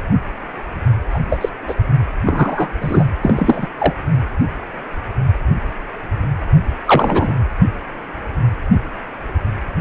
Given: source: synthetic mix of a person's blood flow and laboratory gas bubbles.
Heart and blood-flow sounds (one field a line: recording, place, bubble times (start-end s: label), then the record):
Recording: Doppler ultrasound of blood flow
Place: precordium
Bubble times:
1.14-1.20 s: bubbles
1.29-1.49 s: bubbles
1.68-1.74 s: bubbles
2.26-2.69 s: bubbles
2.81-3.04 s: bubbles
3.20-3.67 s: bubbles
3.78-3.94 s: bubbles
6.86-7.33 s: bubbles
From the record:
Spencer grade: 2 (many but less than half of the cardiac periods contain bubble signals, singularly or in groups)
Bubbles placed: anywhere in the cardiac cycle